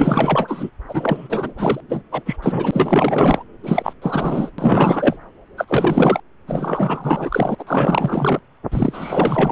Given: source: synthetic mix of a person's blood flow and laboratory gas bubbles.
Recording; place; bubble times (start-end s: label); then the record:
Doppler ultrasound of blood flow; subclavian vein
0.00-0.70 s: bubbles
0.88-1.54 s: bubbles
1.58-1.80 s: bubbles
1.89-2.02 s: bubbles
2.11-2.36 s: bubbles
2.42-3.43 s: bubbles
3.63-3.93 s: bubbles
4.02-4.51 s: bubbles
4.58-5.17 s: bubbles
5.57-6.20 s: bubbles
6.47-7.55 s: bubbles
7.58-8.39 s: bubbles
8.71-9.52 s: bubbles
From the record:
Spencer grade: 4 (maximum detectable bubble signal sounding continuously throughout systole and diastole of every cardiac period, and overriding the amplitude of the normal cardiac signals); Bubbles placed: anywhere in the cardiac cycle